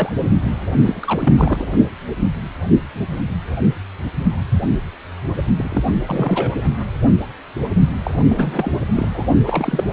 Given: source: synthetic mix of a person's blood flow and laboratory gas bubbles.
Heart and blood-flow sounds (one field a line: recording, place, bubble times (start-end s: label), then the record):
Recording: Doppler ultrasound of blood flow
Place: precordium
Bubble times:
0.00-0.15 s: bubbles
0.41-0.53 s: bubbles
0.77-1.71 s: bubbles
5.57-5.84 s: bubbles
6.07-6.57 s: bubbles
8.04-8.13 s: bubbles
8.29-8.72 s: bubbles
8.95-9.08 s: bubbles
9.13-9.26 s: bubbles
9.46-9.84 s: bubbles
From the record:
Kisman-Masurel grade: 332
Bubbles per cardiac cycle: rolling drumbeat, 9 or more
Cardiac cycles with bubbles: 50 to 99%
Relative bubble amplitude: moderate (0.250 to 0.450)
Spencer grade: 3 (all of the cardiac periods contain showers or single bubble signals, but not dominating or overriding the cardiac motion signals)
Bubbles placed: only in the low amplitude regions of the cardiac cycle